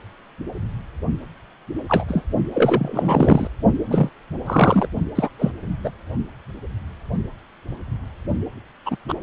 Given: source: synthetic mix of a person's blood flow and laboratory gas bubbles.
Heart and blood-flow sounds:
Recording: Doppler ultrasound of blood flow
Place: precordium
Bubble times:
1.89-2.04 s: bubbles
2.08-2.23 s: bubbles
2.53-3.47 s: bubbles
3.88-4.09 s: bubbles
4.46-4.88 s: bubbles
5.15-5.29 s: bubbles
5.38-5.51 s: bubbles
5.83-5.91 s: bubbles
8.86-8.98 s: bubbles
9.08-9.14 s: bubbles
From the record:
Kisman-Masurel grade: 233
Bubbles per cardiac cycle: several, 3 to 8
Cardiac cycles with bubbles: 50 to 99%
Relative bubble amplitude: loud (0.450 to 0.775)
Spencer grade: 3 (all of the cardiac periods contain showers or single bubble signals, but not dominating or overriding the cardiac motion signals)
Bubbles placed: only in the low amplitude regions of the cardiac cycle

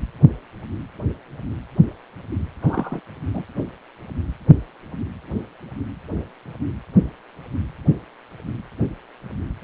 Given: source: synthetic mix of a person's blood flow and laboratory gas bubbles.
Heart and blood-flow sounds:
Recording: Doppler ultrasound of blood flow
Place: precordium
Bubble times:
2.62-3.00 s: bubbles
3.34-3.44 s: bubbles
From the record:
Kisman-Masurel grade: 112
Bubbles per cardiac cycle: 1 to 2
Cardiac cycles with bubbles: 1 to 10%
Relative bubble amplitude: moderate (0.250 to 0.450)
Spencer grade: 1 (occasional bubble signal discernible with the cardiac motion signal, with majority of cardiac periods free of bubbles)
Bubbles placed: anywhere in the cardiac cycle

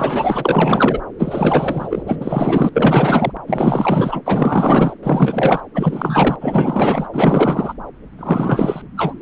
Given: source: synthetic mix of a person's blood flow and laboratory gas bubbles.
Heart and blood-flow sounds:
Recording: Doppler ultrasound of blood flow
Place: subclavian vein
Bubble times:
0.00-1.02 s: bubbles
1.19-2.71 s: bubbles
2.75-3.31 s: bubbles
3.46-4.21 s: bubbles
4.25-4.93 s: bubbles
5.03-5.61 s: bubbles
5.74-6.37 s: bubbles
6.41-7.08 s: bubbles
7.13-7.74 s: bubbles
8.17-8.81 s: bubbles
8.96-9.14 s: bubbles
From the record:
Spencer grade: 4 (maximum detectable bubble signal sounding continuously throughout systole and diastole of every cardiac period, and overriding the amplitude of the normal cardiac signals)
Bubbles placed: anywhere in the cardiac cycle

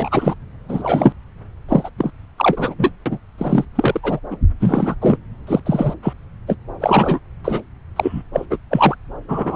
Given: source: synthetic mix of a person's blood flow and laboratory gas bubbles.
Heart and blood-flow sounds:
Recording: Doppler ultrasound of blood flow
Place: subclavian vein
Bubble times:
0.00-0.34 s: bubbles
0.69-1.14 s: bubbles
1.68-1.90 s: bubbles
1.98-2.12 s: bubbles
2.38-2.74 s: bubbles
2.78-2.92 s: bubbles
3.05-3.19 s: bubbles
3.38-3.65 s: bubbles
3.75-4.20 s: bubbles
4.31-4.37 s: bubbles
4.59-4.95 s: bubbles
5.01-5.17 s: bubbles
5.47-5.60 s: bubbles
5.66-5.94 s: bubbles
6.02-6.13 s: bubbles
6.47-6.56 s: bubbles
6.80-7.20 s: bubbles
7.44-7.62 s: bubbles
7.96-8.22 s: bubbles
8.33-8.46 s: bubbles
8.50-8.58 s: bubbles
8.71-8.95 s: bubbles
9.28-9.56 s: bubbles
From the record:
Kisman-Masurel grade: 243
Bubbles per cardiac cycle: several, 3 to 8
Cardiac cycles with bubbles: 100%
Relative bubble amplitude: loud (0.450 to 0.775)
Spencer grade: 3 (all of the cardiac periods contain showers or single bubble signals, but not dominating or overriding the cardiac motion signals)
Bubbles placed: anywhere in the cardiac cycle

